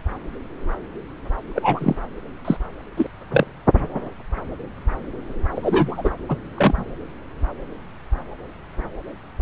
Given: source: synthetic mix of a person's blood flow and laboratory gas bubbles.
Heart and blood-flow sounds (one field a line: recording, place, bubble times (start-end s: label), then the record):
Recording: Doppler ultrasound of blood flow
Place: subclavian vein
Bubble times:
1.54-1.95 s: bubbles
2.45-2.56 s: bubbles
2.97-3.06 s: bubbles
3.31-3.47 s: bubbles
5.55-6.10 s: bubbles
6.28-6.36 s: bubbles
6.55-6.94 s: bubbles
From the record:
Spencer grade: 2 (many but less than half of the cardiac periods contain bubble signals, singularly or in groups)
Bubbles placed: anywhere in the cardiac cycle